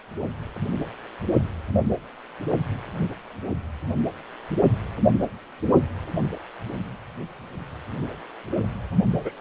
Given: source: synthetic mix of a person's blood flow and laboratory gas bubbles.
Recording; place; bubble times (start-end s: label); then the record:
Doppler ultrasound of blood flow; precordium
9.24-9.31 s: bubbles
From the record:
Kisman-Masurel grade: 112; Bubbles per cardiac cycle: 1 to 2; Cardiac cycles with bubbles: 1 to 10%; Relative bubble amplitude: moderate (0.250 to 0.450); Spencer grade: 1 (occasional bubble signal discernible with the cardiac motion signal, with majority of cardiac periods free of bubbles); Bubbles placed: only in the low amplitude regions of the cardiac cycle